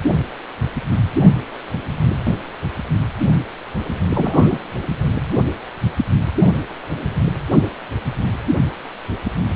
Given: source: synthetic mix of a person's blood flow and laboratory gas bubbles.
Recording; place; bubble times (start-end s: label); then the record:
Doppler ultrasound of blood flow; precordium
4.14-4.58 s: bubbles
From the record:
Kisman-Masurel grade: 112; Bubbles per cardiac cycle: 1 to 2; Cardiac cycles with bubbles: 1 to 10%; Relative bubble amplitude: moderate (0.250 to 0.450); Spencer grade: 1 (occasional bubble signal discernible with the cardiac motion signal, with majority of cardiac periods free of bubbles); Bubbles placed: anywhere in the cardiac cycle